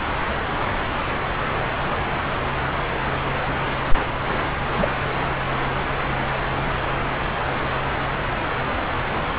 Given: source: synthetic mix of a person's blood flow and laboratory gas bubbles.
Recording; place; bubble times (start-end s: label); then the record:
Doppler ultrasound of blood flow; subclavian vein
4.78-4.86 s: bubbles
From the record:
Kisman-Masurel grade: 122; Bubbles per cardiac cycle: 1 to 2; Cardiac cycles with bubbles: 10 to 50%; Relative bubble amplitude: moderate (0.250 to 0.450); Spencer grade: 2 (many but less than half of the cardiac periods contain bubble signals, singularly or in groups); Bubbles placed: anywhere in the cardiac cycle